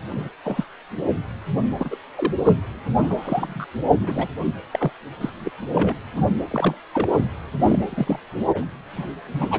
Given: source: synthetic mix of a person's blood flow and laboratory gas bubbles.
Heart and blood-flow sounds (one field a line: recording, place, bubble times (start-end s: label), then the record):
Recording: Doppler ultrasound of blood flow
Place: precordium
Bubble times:
0.16-0.29 s: bubbles
0.45-0.64 s: bubbles
0.98-1.02 s: bubbles
1.78-1.96 s: bubbles
2.17-2.32 s: bubbles
2.38-2.52 s: bubbles
2.96-3.65 s: bubbles
3.99-4.28 s: bubbles
4.72-4.92 s: bubbles
5.21-5.29 s: bubbles
5.40-5.52 s: bubbles
5.71-5.94 s: bubbles
6.16-6.24 s: bubbles
6.50-6.75 s: bubbles
6.93-7.08 s: bubbles
7.13-7.25 s: bubbles
7.59-8.20 s: bubbles
8.45-8.65 s: bubbles
8.97-9.05 s: bubbles
9.31-9.59 s: bubbles
From the record:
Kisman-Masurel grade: 242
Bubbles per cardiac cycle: several, 3 to 8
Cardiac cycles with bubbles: 100%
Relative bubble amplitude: moderate (0.250 to 0.450)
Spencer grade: 3 (all of the cardiac periods contain showers or single bubble signals, but not dominating or overriding the cardiac motion signals)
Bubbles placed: anywhere in the cardiac cycle